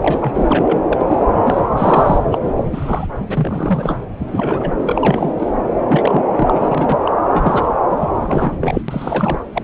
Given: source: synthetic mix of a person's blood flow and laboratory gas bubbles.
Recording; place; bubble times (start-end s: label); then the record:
Doppler ultrasound of blood flow; subclavian vein
0.00-0.83 s: bubbles
0.92-1.03 s: bubbles
1.07-1.26 s: bubbles
1.45-1.60 s: bubbles
1.76-2.18 s: bubbles
2.30-2.53 s: bubbles
2.57-2.64 s: bubbles
2.71-3.07 s: bubbles
3.29-3.98 s: bubbles
4.29-4.73 s: bubbles
4.85-5.49 s: bubbles
5.88-6.24 s: bubbles
6.35-6.98 s: bubbles
7.00-7.12 s: bubbles
7.33-7.74 s: bubbles
7.87-8.10 s: bubbles
8.14-8.54 s: bubbles
8.60-8.81 s: bubbles
8.88-9.48 s: bubbles
9.54-9.62 s: bubbles
From the record:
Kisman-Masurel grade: 342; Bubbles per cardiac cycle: rolling drumbeat, 9 or more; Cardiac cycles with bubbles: 100%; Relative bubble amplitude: moderate (0.250 to 0.450); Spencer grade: 3 (all of the cardiac periods contain showers or single bubble signals, but not dominating or overriding the cardiac motion signals); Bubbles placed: anywhere in the cardiac cycle